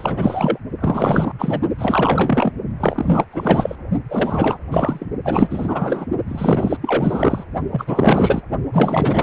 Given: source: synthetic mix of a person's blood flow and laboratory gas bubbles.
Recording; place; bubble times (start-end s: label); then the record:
Doppler ultrasound of blood flow; precordium
0.00-0.58 s: bubbles
0.80-1.31 s: bubbles
1.39-1.60 s: bubbles
1.78-2.52 s: bubbles
2.79-3.25 s: bubbles
3.32-3.75 s: bubbles
4.08-4.58 s: bubbles
4.71-5.06 s: bubbles
5.25-6.07 s: bubbles
6.28-6.76 s: bubbles
6.81-7.44 s: bubbles
7.71-8.41 s: bubbles
8.72-9.23 s: bubbles
From the record:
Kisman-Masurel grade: 444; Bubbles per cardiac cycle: continuous sound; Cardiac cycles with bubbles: 100%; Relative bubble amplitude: maximal (0.775 to 0.999); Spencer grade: 4 (maximum detectable bubble signal sounding continuously throughout systole and diastole of every cardiac period, and overriding the amplitude of the normal cardiac signals); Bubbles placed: only in the low amplitude regions of the cardiac cycle